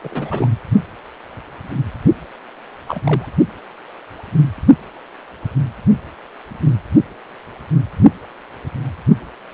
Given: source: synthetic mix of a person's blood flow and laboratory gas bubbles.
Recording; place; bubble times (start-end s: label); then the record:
Doppler ultrasound of blood flow; precordium
0.03-0.47 s: bubbles
2.87-3.00 s: bubbles
3.04-3.29 s: bubbles
From the record:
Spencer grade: 2 (many but less than half of the cardiac periods contain bubble signals, singularly or in groups); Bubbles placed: only in the low amplitude regions of the cardiac cycle